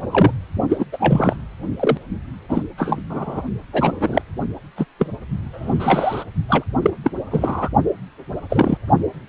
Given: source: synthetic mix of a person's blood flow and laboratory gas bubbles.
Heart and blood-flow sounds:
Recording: Doppler ultrasound of blood flow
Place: precordium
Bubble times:
0.11-0.33 s: bubbles
0.69-0.85 s: bubbles
0.92-1.36 s: bubbles
1.80-1.97 s: bubbles
2.48-2.63 s: bubbles
2.77-3.02 s: bubbles
3.09-3.42 s: bubbles
3.72-4.21 s: bubbles
4.76-4.85 s: bubbles
4.99-5.07 s: bubbles
5.53-6.24 s: bubbles
6.48-6.64 s: bubbles
6.82-6.91 s: bubbles
7.04-7.11 s: bubbles
7.30-7.69 s: bubbles
8.49-8.78 s: bubbles
From the record:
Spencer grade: 3 (all of the cardiac periods contain showers or single bubble signals, but not dominating or overriding the cardiac motion signals)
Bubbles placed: only in the low amplitude regions of the cardiac cycle

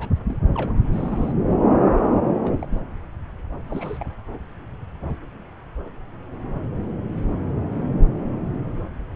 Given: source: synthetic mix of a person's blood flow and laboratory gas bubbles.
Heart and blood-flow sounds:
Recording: Doppler ultrasound of blood flow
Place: subclavian vein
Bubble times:
0.00-0.12 s: bubbles
0.27-0.38 s: bubbles
0.54-0.73 s: bubbles
0.91-1.33 s: bubbles
2.44-2.78 s: bubbles
3.67-4.12 s: bubbles
From the record:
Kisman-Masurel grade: 221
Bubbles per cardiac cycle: several, 3 to 8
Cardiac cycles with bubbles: 10 to 50%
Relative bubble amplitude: barely perceptible (0.100 to 0.250)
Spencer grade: 2 (many but less than half of the cardiac periods contain bubble signals, singularly or in groups)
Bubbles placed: anywhere in the cardiac cycle

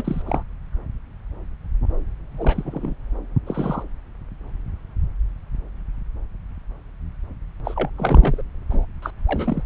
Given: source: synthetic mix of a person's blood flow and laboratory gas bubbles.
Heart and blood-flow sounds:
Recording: Doppler ultrasound of blood flow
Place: subclavian vein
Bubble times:
0.00-0.22 s: bubbles
0.26-0.44 s: bubbles
2.38-2.94 s: bubbles
3.46-3.83 s: bubbles
7.64-7.90 s: bubbles
7.96-8.42 s: bubbles
8.71-8.85 s: bubbles
9.02-9.11 s: bubbles
9.26-9.63 s: bubbles
From the record:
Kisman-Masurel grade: 232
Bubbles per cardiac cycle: several, 3 to 8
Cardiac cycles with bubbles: 50 to 99%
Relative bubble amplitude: moderate (0.250 to 0.450)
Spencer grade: 3 (all of the cardiac periods contain showers or single bubble signals, but not dominating or overriding the cardiac motion signals)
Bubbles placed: anywhere in the cardiac cycle

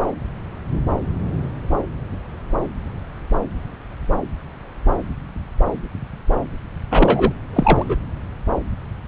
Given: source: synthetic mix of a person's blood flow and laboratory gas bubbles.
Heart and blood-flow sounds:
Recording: Doppler ultrasound of blood flow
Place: subclavian vein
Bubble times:
6.91-7.33 s: bubbles
7.53-7.85 s: bubbles
7.89-7.95 s: bubbles
From the record:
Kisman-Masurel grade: 213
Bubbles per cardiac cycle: several, 3 to 8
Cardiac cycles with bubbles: 1 to 10%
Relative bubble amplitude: loud (0.450 to 0.775)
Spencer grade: 1 (occasional bubble signal discernible with the cardiac motion signal, with majority of cardiac periods free of bubbles)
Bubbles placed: anywhere in the cardiac cycle

